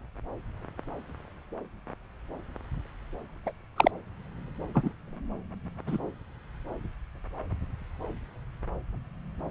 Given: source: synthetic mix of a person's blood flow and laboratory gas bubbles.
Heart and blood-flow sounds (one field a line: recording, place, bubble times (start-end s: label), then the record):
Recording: Doppler ultrasound of blood flow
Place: subclavian vein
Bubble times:
3.46-3.52 s: bubbles
3.76-3.91 s: bubbles
4.74-4.92 s: bubbles
5.87-5.99 s: bubbles
From the record:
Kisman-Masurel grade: 122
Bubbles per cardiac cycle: 1 to 2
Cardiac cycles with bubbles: 10 to 50%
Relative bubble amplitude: moderate (0.250 to 0.450)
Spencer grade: 2 (many but less than half of the cardiac periods contain bubble signals, singularly or in groups)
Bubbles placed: anywhere in the cardiac cycle